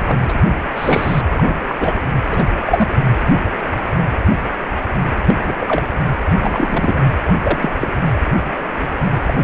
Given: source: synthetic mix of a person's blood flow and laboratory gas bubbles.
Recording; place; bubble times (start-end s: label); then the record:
Doppler ultrasound of blood flow; precordium
0.07-0.17 s: bubbles
0.28-0.34 s: bubbles
0.75-1.21 s: bubbles
1.38-1.43 s: bubbles
1.48-1.58 s: bubbles
1.67-1.75 s: bubbles
1.79-1.98 s: bubbles
2.29-2.46 s: bubbles
2.65-2.88 s: bubbles
5.27-5.34 s: bubbles
5.43-5.55 s: bubbles
5.60-5.83 s: bubbles
6.41-6.94 s: bubbles
7.42-7.59 s: bubbles
7.62-7.70 s: bubbles
7.81-7.89 s: bubbles
9.27-9.34 s: bubbles
From the record:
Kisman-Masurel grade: 232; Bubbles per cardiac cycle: several, 3 to 8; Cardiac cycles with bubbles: 50 to 99%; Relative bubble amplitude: moderate (0.250 to 0.450); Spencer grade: 3 (all of the cardiac periods contain showers or single bubble signals, but not dominating or overriding the cardiac motion signals); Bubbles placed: anywhere in the cardiac cycle